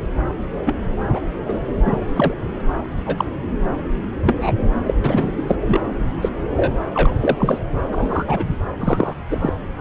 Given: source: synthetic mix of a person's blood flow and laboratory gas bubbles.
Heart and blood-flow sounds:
Doppler ultrasound of blood flow; subclavian vein
0.66-0.75 s: bubbles
1.13-1.20 s: bubbles
1.48-1.60 s: bubbles
1.86-1.96 s: bubbles
2.16-2.34 s: bubbles
3.06-3.25 s: bubbles
3.67-3.69 s: bubbles
4.26-4.54 s: bubbles
4.86-4.94 s: bubbles
5.00-5.33 s: bubbles
5.37-5.43 s: bubbles
5.48-5.55 s: bubbles
5.67-5.81 s: bubbles
6.04-6.07 s: bubbles
6.21-6.29 s: bubbles
6.57-6.74 s: bubbles
6.94-7.15 s: bubbles
7.20-7.58 s: bubbles
7.92-8.44 s: bubbles
8.79-9.14 s: bubbles
9.30-9.51 s: bubbles
9.77-9.81 s: bubbles
From the record:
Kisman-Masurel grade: 233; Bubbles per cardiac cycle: several, 3 to 8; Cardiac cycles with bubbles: 50 to 99%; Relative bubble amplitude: loud (0.450 to 0.775); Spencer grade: 3 (all of the cardiac periods contain showers or single bubble signals, but not dominating or overriding the cardiac motion signals); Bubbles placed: anywhere in the cardiac cycle

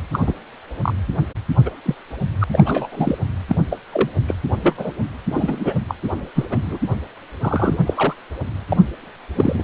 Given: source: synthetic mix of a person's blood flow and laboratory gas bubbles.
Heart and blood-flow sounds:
Doppler ultrasound of blood flow; precordium
0.13-0.33 s: bubbles
0.82-0.93 s: bubbles
1.65-1.71 s: bubbles
1.85-1.94 s: bubbles
2.41-2.44 s: bubbles
2.52-2.89 s: bubbles
2.92-3.17 s: bubbles
3.48-3.56 s: bubbles
3.71-3.79 s: bubbles
3.92-4.09 s: bubbles
4.28-4.34 s: bubbles
4.63-4.75 s: bubbles
4.78-4.91 s: bubbles
5.30-5.79 s: bubbles
5.88-5.95 s: bubbles
6.35-6.46 s: bubbles
6.50-6.78 s: bubbles
7.41-7.79 s: bubbles
7.86-8.14 s: bubbles
8.68-8.82 s: bubbles
9.35-9.63 s: bubbles
From the record:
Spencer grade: 3 (all of the cardiac periods contain showers or single bubble signals, but not dominating or overriding the cardiac motion signals); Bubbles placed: anywhere in the cardiac cycle

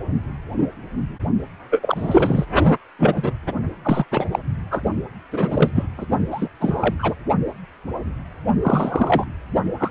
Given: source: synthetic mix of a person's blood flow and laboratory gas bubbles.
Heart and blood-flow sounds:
Doppler ultrasound of blood flow; precordium
1.71-2.46 s: bubbles
2.99-3.32 s: bubbles
3.84-4.04 s: bubbles
4.11-4.26 s: bubbles
4.31-4.39 s: bubbles
4.71-4.82 s: bubbles
5.32-5.71 s: bubbles
5.75-5.88 s: bubbles
5.97-6.05 s: bubbles
6.30-6.48 s: bubbles
6.60-6.94 s: bubbles
6.99-7.16 s: bubbles
8.62-9.30 s: bubbles
9.77-9.91 s: bubbles
From the record:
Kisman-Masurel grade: 233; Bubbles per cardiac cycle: several, 3 to 8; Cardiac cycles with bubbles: 50 to 99%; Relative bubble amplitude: loud (0.450 to 0.775); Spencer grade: 3 (all of the cardiac periods contain showers or single bubble signals, but not dominating or overriding the cardiac motion signals); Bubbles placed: only in the low amplitude regions of the cardiac cycle

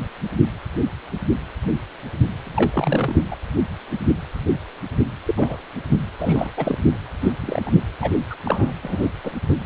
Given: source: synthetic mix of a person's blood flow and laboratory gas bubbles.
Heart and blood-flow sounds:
Doppler ultrasound of blood flow; precordium
2.45-3.22 s: bubbles
3.31-3.35 s: bubbles
5.27-5.58 s: bubbles
5.89-6.00 s: bubbles
6.19-6.50 s: bubbles
6.57-6.78 s: bubbles
6.84-6.95 s: bubbles
7.22-7.33 s: bubbles
7.42-7.72 s: bubbles
8.01-8.24 s: bubbles
8.30-8.36 s: bubbles
8.44-8.71 s: bubbles
8.82-9.09 s: bubbles
9.23-9.32 s: bubbles
9.48-9.54 s: bubbles
From the record:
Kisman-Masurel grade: 232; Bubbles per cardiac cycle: several, 3 to 8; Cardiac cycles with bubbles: 50 to 99%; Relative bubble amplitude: moderate (0.250 to 0.450); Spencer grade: 3 (all of the cardiac periods contain showers or single bubble signals, but not dominating or overriding the cardiac motion signals); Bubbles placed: anywhere in the cardiac cycle

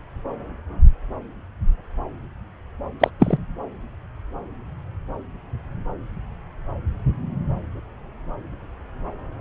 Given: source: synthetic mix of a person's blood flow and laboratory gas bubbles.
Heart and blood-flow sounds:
Doppler ultrasound of blood flow; subclavian vein
3.00-3.10 s: bubbles
3.20-3.38 s: bubbles
From the record:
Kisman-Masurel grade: 123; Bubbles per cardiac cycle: 1 to 2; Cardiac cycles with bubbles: 10 to 50%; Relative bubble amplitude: loud (0.450 to 0.775); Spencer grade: 2 (many but less than half of the cardiac periods contain bubble signals, singularly or in groups); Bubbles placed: anywhere in the cardiac cycle

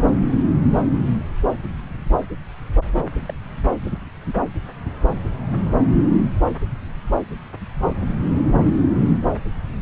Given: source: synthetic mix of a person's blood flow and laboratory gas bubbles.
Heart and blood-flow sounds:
Doppler ultrasound of blood flow; subclavian vein
2.85-3.08 s: bubbles
3.29-3.33 s: bubbles
From the record:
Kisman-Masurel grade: 111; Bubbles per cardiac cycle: 1 to 2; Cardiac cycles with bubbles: 1 to 10%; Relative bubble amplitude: barely perceptible (0.100 to 0.250); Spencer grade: 1 (occasional bubble signal discernible with the cardiac motion signal, with majority of cardiac periods free of bubbles); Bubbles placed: anywhere in the cardiac cycle

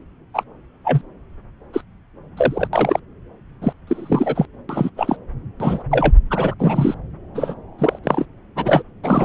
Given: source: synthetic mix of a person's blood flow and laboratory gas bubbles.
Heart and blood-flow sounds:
Doppler ultrasound of blood flow; subclavian vein
0.33-0.43 s: bubbles
0.84-1.02 s: bubbles
1.73-1.82 s: bubbles
2.36-2.67 s: bubbles
2.73-2.99 s: bubbles
3.61-3.73 s: bubbles
3.87-4.46 s: bubbles
4.69-4.90 s: bubbles
4.97-5.17 s: bubbles
5.60-5.84 s: bubbles
5.91-6.14 s: bubbles
6.30-6.54 s: bubbles
6.58-6.95 s: bubbles
7.35-7.54 s: bubbles
7.78-7.99 s: bubbles
8.04-8.25 s: bubbles
8.55-8.82 s: bubbles
9.04-9.25 s: bubbles
From the record:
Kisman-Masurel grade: 243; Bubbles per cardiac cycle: several, 3 to 8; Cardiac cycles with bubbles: 100%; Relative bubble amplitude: loud (0.450 to 0.775); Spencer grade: 3 (all of the cardiac periods contain showers or single bubble signals, but not dominating or overriding the cardiac motion signals); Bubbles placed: anywhere in the cardiac cycle

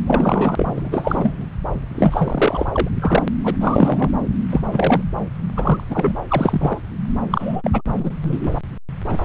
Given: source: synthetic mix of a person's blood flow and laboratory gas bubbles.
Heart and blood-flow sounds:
Doppler ultrasound of blood flow; subclavian vein
0.06-0.88 s: bubbles
0.91-1.45 s: bubbles
1.95-2.68 s: bubbles
2.73-2.90 s: bubbles
3.01-3.23 s: bubbles
3.43-3.56 s: bubbles
3.60-4.11 s: bubbles
4.50-4.61 s: bubbles
4.72-5.01 s: bubbles
5.56-5.83 s: bubbles
5.90-6.17 s: bubbles
6.29-6.81 s: bubbles
7.30-7.71 s: bubbles
7.73-7.82 s: bubbles
7.88-8.11 s: bubbles
8.22-8.51 s: bubbles
9.07-9.18 s: bubbles
From the record:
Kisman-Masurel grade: 343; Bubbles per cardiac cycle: rolling drumbeat, 9 or more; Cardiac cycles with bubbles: 100%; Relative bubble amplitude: loud (0.450 to 0.775); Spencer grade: 3 (all of the cardiac periods contain showers or single bubble signals, but not dominating or overriding the cardiac motion signals); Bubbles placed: anywhere in the cardiac cycle

